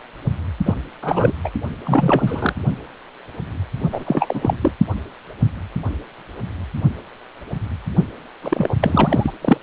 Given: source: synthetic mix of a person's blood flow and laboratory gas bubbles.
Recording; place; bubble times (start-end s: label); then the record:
Doppler ultrasound of blood flow; precordium
0.66-0.74 s: bubbles
1.02-1.33 s: bubbles
1.44-1.49 s: bubbles
1.85-2.54 s: bubbles
3.92-4.04 s: bubbles
4.07-4.54 s: bubbles
4.61-4.72 s: bubbles
8.42-8.74 s: bubbles
8.81-9.33 s: bubbles
9.42-9.58 s: bubbles
From the record:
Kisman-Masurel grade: 333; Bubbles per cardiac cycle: rolling drumbeat, 9 or more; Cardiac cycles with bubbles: 50 to 99%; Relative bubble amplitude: loud (0.450 to 0.775); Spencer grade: 3 (all of the cardiac periods contain showers or single bubble signals, but not dominating or overriding the cardiac motion signals); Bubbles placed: only in the low amplitude regions of the cardiac cycle